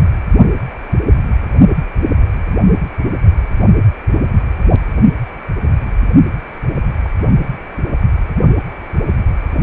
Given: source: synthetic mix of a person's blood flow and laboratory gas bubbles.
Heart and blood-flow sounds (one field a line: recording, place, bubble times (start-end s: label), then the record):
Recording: Doppler ultrasound of blood flow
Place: precordium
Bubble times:
0.00-0.04 s: bubbles
7.05-7.09 s: bubbles
From the record:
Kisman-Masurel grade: 122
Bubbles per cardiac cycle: 1 to 2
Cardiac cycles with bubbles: 10 to 50%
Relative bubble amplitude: moderate (0.250 to 0.450)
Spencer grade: 2 (many but less than half of the cardiac periods contain bubble signals, singularly or in groups)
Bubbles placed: only in the low amplitude regions of the cardiac cycle